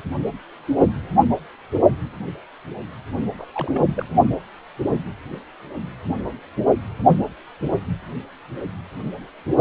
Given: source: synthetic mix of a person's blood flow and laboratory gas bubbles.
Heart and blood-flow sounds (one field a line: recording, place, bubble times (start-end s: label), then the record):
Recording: Doppler ultrasound of blood flow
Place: precordium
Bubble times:
3.38-3.47 s: bubbles
3.54-3.83 s: bubbles
3.95-4.05 s: bubbles
From the record:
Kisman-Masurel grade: 211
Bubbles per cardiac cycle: several, 3 to 8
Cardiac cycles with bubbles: 1 to 10%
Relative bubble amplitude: barely perceptible (0.100 to 0.250)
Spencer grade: 1 (occasional bubble signal discernible with the cardiac motion signal, with majority of cardiac periods free of bubbles)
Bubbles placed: only in the low amplitude regions of the cardiac cycle